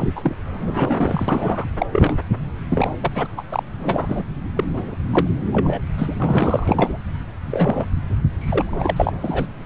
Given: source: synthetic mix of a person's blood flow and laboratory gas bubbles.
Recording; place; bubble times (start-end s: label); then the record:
Doppler ultrasound of blood flow; subclavian vein
0.00-0.11 s: bubbles
0.14-0.35 s: bubbles
0.58-1.65 s: bubbles
1.78-1.87 s: bubbles
1.92-2.17 s: bubbles
2.70-2.92 s: bubbles
3.00-3.27 s: bubbles
3.37-3.43 s: bubbles
3.50-3.63 s: bubbles
3.79-4.22 s: bubbles
4.56-4.64 s: bubbles
4.75-4.96 s: bubbles
5.12-5.27 s: bubbles
5.52-5.82 s: bubbles
5.98-6.15 s: bubbles
6.20-6.97 s: bubbles
7.50-7.86 s: bubbles
8.38-8.93 s: bubbles
8.96-9.46 s: bubbles
From the record:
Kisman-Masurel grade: 242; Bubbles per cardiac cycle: several, 3 to 8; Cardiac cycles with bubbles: 100%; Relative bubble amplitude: moderate (0.250 to 0.450); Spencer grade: 3 (all of the cardiac periods contain showers or single bubble signals, but not dominating or overriding the cardiac motion signals); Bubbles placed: anywhere in the cardiac cycle